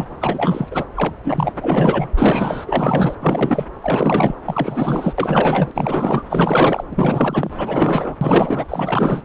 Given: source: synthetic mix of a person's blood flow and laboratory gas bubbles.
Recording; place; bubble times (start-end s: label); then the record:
Doppler ultrasound of blood flow; subclavian vein
0.00-0.05 s: bubbles
0.20-0.67 s: bubbles
0.70-0.84 s: bubbles
0.96-1.16 s: bubbles
1.24-1.53 s: bubbles
1.55-2.11 s: bubbles
2.17-3.15 s: bubbles
3.20-3.66 s: bubbles
3.81-4.36 s: bubbles
4.46-5.15 s: bubbles
5.17-5.71 s: bubbles
5.75-6.23 s: bubbles
6.29-6.84 s: bubbles
6.91-7.50 s: bubbles
7.57-8.17 s: bubbles
8.21-8.66 s: bubbles
8.69-9.22 s: bubbles
From the record:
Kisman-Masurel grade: 444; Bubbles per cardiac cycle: continuous sound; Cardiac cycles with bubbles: 100%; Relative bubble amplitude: maximal (0.775 to 0.999); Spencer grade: 4 (maximum detectable bubble signal sounding continuously throughout systole and diastole of every cardiac period, and overriding the amplitude of the normal cardiac signals); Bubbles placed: anywhere in the cardiac cycle